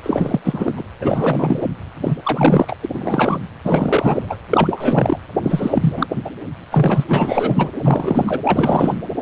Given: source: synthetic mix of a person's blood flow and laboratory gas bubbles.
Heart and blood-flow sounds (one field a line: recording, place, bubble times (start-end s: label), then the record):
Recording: Doppler ultrasound of blood flow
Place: precordium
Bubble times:
0.03-0.40 s: bubbles
0.44-0.83 s: bubbles
1.01-1.68 s: bubbles
2.03-2.17 s: bubbles
2.23-2.75 s: bubbles
2.83-2.88 s: bubbles
2.94-3.39 s: bubbles
3.64-4.37 s: bubbles
4.50-5.19 s: bubbles
5.43-6.07 s: bubbles
6.25-6.31 s: bubbles
6.63-6.66 s: bubbles
6.71-7.04 s: bubbles
7.08-7.70 s: bubbles
7.82-8.41 s: bubbles
8.44-9.03 s: bubbles
From the record:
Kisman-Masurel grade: 343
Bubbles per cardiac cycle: rolling drumbeat, 9 or more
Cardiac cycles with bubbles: 100%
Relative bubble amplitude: loud (0.450 to 0.775)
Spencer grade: 3 (all of the cardiac periods contain showers or single bubble signals, but not dominating or overriding the cardiac motion signals)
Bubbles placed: anywhere in the cardiac cycle